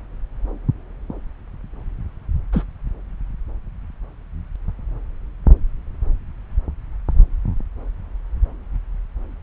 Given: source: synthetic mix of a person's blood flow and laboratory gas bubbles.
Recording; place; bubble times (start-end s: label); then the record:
Doppler ultrasound of blood flow; subclavian vein
2.52-2.65 s: bubbles
From the record:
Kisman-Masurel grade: 112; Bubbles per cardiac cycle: 1 to 2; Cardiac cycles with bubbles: 1 to 10%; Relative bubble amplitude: moderate (0.250 to 0.450); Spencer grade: 1 (occasional bubble signal discernible with the cardiac motion signal, with majority of cardiac periods free of bubbles); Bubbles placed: anywhere in the cardiac cycle